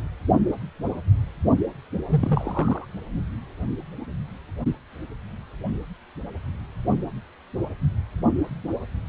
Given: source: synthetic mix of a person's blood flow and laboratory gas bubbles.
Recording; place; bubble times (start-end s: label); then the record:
Doppler ultrasound of blood flow; precordium
2.09-2.85 s: bubbles
From the record:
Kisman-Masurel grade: 221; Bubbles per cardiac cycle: several, 3 to 8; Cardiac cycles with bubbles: 10 to 50%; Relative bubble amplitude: barely perceptible (0.100 to 0.250); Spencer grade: 2 (many but less than half of the cardiac periods contain bubble signals, singularly or in groups); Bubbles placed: only in the low amplitude regions of the cardiac cycle